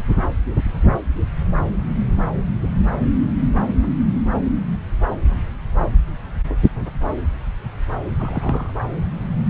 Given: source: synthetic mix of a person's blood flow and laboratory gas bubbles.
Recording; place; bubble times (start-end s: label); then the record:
Doppler ultrasound of blood flow; subclavian vein
8.18-8.71 s: bubbles
From the record:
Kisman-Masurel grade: 111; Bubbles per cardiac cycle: 1 to 2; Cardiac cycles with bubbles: 1 to 10%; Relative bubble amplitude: barely perceptible (0.100 to 0.250); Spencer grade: 1 (occasional bubble signal discernible with the cardiac motion signal, with majority of cardiac periods free of bubbles); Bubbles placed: anywhere in the cardiac cycle